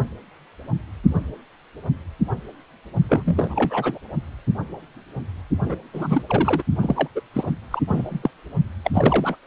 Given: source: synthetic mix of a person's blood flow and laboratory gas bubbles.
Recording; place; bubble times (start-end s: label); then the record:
Doppler ultrasound of blood flow; precordium
3.09-3.98 s: bubbles
5.63-5.75 s: bubbles
5.94-6.23 s: bubbles
6.29-6.62 s: bubbles
6.81-7.08 s: bubbles
7.15-7.21 s: bubbles
7.33-7.53 s: bubbles
7.71-7.80 s: bubbles
7.88-8.30 s: bubbles
8.84-9.36 s: bubbles
From the record:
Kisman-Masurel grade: 332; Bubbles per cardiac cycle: rolling drumbeat, 9 or more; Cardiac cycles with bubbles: 50 to 99%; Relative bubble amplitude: moderate (0.250 to 0.450); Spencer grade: 3 (all of the cardiac periods contain showers or single bubble signals, but not dominating or overriding the cardiac motion signals); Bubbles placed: only in the low amplitude regions of the cardiac cycle